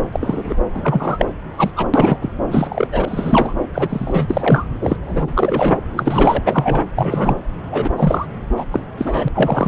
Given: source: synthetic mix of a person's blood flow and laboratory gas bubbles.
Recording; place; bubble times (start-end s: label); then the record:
Doppler ultrasound of blood flow; subclavian vein
0.12-0.55 s: bubbles
0.74-1.25 s: bubbles
1.57-1.71 s: bubbles
1.76-1.88 s: bubbles
1.94-2.18 s: bubbles
2.21-2.33 s: bubbles
2.49-2.88 s: bubbles
2.92-3.53 s: bubbles
3.74-4.67 s: bubbles
4.81-4.96 s: bubbles
5.06-5.77 s: bubbles
5.96-6.42 s: bubbles
6.46-6.86 s: bubbles
6.96-7.36 s: bubbles
7.71-7.91 s: bubbles
7.97-8.26 s: bubbles
8.56-8.65 s: bubbles
8.71-8.79 s: bubbles
8.97-9.29 s: bubbles
9.35-9.68 s: bubbles
From the record:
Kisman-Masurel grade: 243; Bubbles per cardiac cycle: several, 3 to 8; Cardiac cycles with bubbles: 100%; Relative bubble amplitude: loud (0.450 to 0.775); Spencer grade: 3 (all of the cardiac periods contain showers or single bubble signals, but not dominating or overriding the cardiac motion signals); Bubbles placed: anywhere in the cardiac cycle